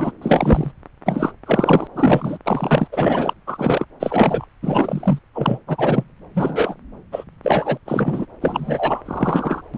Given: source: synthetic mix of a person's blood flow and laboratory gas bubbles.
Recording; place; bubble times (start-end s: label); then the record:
Doppler ultrasound of blood flow; subclavian vein
0.00-0.11 s: bubbles
0.22-0.72 s: bubbles
1.06-1.32 s: bubbles
1.46-1.87 s: bubbles
1.95-2.38 s: bubbles
2.45-2.88 s: bubbles
2.92-3.33 s: bubbles
3.46-3.85 s: bubbles
4.00-4.46 s: bubbles
4.62-5.19 s: bubbles
5.35-5.58 s: bubbles
5.67-6.04 s: bubbles
6.34-6.75 s: bubbles
7.12-7.24 s: bubbles
7.44-7.78 s: bubbles
7.86-8.26 s: bubbles
8.41-9.02 s: bubbles
9.05-9.62 s: bubbles
9.73-9.78 s: bubbles
From the record:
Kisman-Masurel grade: 243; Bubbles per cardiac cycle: several, 3 to 8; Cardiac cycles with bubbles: 100%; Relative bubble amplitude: loud (0.450 to 0.775); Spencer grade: 3 (all of the cardiac periods contain showers or single bubble signals, but not dominating or overriding the cardiac motion signals); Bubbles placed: anywhere in the cardiac cycle